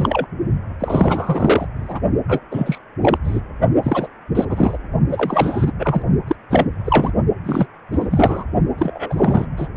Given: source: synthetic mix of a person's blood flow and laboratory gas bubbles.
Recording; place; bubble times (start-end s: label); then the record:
Doppler ultrasound of blood flow; precordium
0.00-0.27 s: bubbles
0.80-1.67 s: bubbles
1.75-2.00 s: bubbles
2.28-2.40 s: bubbles
2.51-2.78 s: bubbles
3.02-3.18 s: bubbles
3.23-3.40 s: bubbles
3.82-4.08 s: bubbles
4.35-4.45 s: bubbles
4.49-4.77 s: bubbles
5.10-5.72 s: bubbles
5.79-6.02 s: bubbles
6.27-6.36 s: bubbles
6.50-6.67 s: bubbles
6.85-7.12 s: bubbles
7.45-7.66 s: bubbles
7.92-8.44 s: bubbles
8.77-9.46 s: bubbles
9.57-9.67 s: bubbles
From the record:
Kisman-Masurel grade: 343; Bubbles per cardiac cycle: rolling drumbeat, 9 or more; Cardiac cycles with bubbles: 100%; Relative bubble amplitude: loud (0.450 to 0.775); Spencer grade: 3 (all of the cardiac periods contain showers or single bubble signals, but not dominating or overriding the cardiac motion signals); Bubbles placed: only in the low amplitude regions of the cardiac cycle